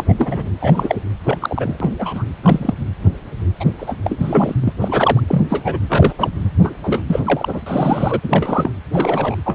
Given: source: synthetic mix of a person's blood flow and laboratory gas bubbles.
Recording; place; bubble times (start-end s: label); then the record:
Doppler ultrasound of blood flow; precordium
0.00-0.04 s: bubbles
0.09-0.14 s: bubbles
0.18-0.51 s: bubbles
0.61-0.96 s: bubbles
1.25-1.38 s: bubbles
1.40-1.77 s: bubbles
1.80-1.96 s: bubbles
1.99-2.24 s: bubbles
2.43-2.74 s: bubbles
3.60-3.65 s: bubbles
3.79-3.94 s: bubbles
4.04-4.54 s: bubbles
4.62-4.73 s: bubbles
4.81-5.20 s: bubbles
5.28-5.42 s: bubbles
5.50-5.62 s: bubbles
5.65-5.78 s: bubbles
5.88-6.14 s: bubbles
6.18-6.30 s: bubbles
6.62-6.74 s: bubbles
6.83-7.02 s: bubbles
7.07-7.20 s: bubbles
7.25-7.62 s: bubbles
7.66-8.21 s: bubbles
8.23-8.71 s: bubbles
8.92-9.36 s: bubbles
9.45-9.54 s: bubbles
From the record:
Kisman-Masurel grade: 242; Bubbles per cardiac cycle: several, 3 to 8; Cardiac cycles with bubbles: 100%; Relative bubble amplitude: moderate (0.250 to 0.450); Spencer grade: 3 (all of the cardiac periods contain showers or single bubble signals, but not dominating or overriding the cardiac motion signals); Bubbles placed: anywhere in the cardiac cycle